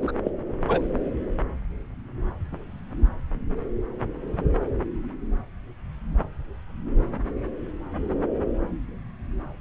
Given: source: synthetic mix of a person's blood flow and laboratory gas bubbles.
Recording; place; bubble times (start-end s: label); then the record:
Doppler ultrasound of blood flow; subclavian vein
0.01-0.12 s: bubbles
0.23-0.31 s: bubbles
0.68-0.81 s: bubbles
From the record:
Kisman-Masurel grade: 212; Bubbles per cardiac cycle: several, 3 to 8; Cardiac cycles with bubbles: 1 to 10%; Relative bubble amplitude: moderate (0.250 to 0.450); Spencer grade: 1 (occasional bubble signal discernible with the cardiac motion signal, with majority of cardiac periods free of bubbles); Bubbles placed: anywhere in the cardiac cycle